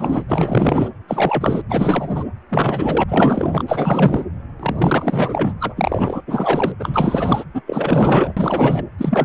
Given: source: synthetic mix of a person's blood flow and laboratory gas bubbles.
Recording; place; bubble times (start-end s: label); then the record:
Doppler ultrasound of blood flow; precordium
0.00-0.24 s: bubbles
0.28-0.90 s: bubbles
1.07-1.61 s: bubbles
1.69-2.25 s: bubbles
2.49-3.04 s: bubbles
3.07-3.63 s: bubbles
3.67-4.25 s: bubbles
4.59-5.74 s: bubbles
5.77-6.22 s: bubbles
6.27-6.72 s: bubbles
6.79-7.44 s: bubbles
7.54-7.61 s: bubbles
7.67-8.33 s: bubbles
8.37-8.85 s: bubbles
8.97-9.25 s: bubbles
From the record:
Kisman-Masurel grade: 444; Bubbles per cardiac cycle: continuous sound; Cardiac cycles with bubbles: 100%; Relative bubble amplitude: maximal (0.775 to 0.999); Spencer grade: 4 (maximum detectable bubble signal sounding continuously throughout systole and diastole of every cardiac period, and overriding the amplitude of the normal cardiac signals); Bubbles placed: anywhere in the cardiac cycle